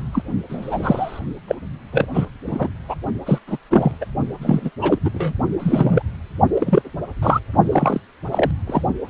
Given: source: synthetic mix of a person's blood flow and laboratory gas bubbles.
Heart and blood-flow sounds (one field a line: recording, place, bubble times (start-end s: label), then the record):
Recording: Doppler ultrasound of blood flow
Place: precordium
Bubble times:
0.12-0.22 s: bubbles
0.49-1.20 s: bubbles
1.48-1.55 s: bubbles
1.93-2.06 s: bubbles
2.13-2.25 s: bubbles
2.47-2.70 s: bubbles
2.88-2.95 s: bubbles
3.25-3.38 s: bubbles
3.47-3.57 s: bubbles
3.70-3.96 s: bubbles
4.01-4.05 s: bubbles
4.42-4.70 s: bubbles
4.81-4.99 s: bubbles
5.04-5.09 s: bubbles
5.14-5.33 s: bubbles
5.59-6.02 s: bubbles
6.54-6.82 s: bubbles
7.21-7.39 s: bubbles
7.71-8.00 s: bubbles
8.31-8.51 s: bubbles
8.67-8.81 s: bubbles
From the record:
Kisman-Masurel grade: 243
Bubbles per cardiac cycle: several, 3 to 8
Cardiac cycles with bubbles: 100%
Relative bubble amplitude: loud (0.450 to 0.775)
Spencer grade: 3 (all of the cardiac periods contain showers or single bubble signals, but not dominating or overriding the cardiac motion signals)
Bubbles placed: only in the low amplitude regions of the cardiac cycle